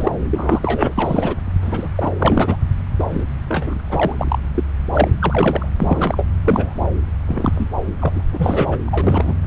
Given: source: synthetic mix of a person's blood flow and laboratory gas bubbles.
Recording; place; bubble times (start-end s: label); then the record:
Doppler ultrasound of blood flow; subclavian vein
0.00-0.12 s: bubbles
0.31-0.93 s: bubbles
0.97-1.36 s: bubbles
1.61-1.88 s: bubbles
1.95-2.10 s: bubbles
2.19-2.57 s: bubbles
2.99-3.05 s: bubbles
3.10-3.24 s: bubbles
3.49-3.81 s: bubbles
3.84-4.38 s: bubbles
4.55-4.63 s: bubbles
4.92-5.10 s: bubbles
5.21-5.66 s: bubbles
5.79-6.26 s: bubbles
6.44-6.91 s: bubbles
7.27-7.70 s: bubbles
8.00-8.21 s: bubbles
8.32-8.78 s: bubbles
8.87-9.37 s: bubbles
From the record:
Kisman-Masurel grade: 242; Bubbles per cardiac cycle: several, 3 to 8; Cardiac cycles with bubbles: 100%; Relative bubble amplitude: moderate (0.250 to 0.450); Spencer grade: 3 (all of the cardiac periods contain showers or single bubble signals, but not dominating or overriding the cardiac motion signals); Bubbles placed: anywhere in the cardiac cycle